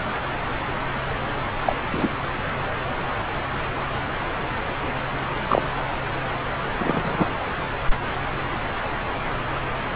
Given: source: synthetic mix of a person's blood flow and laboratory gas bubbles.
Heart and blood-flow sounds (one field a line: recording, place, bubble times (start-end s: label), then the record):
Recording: Doppler ultrasound of blood flow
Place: subclavian vein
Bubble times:
1.66-1.78 s: bubbles
1.93-2.08 s: bubbles
5.48-5.62 s: bubbles
6.79-7.28 s: bubbles
From the record:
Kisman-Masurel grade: 123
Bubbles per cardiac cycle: 1 to 2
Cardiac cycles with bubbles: 10 to 50%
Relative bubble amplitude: loud (0.450 to 0.775)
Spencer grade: 2 (many but less than half of the cardiac periods contain bubble signals, singularly or in groups)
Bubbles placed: anywhere in the cardiac cycle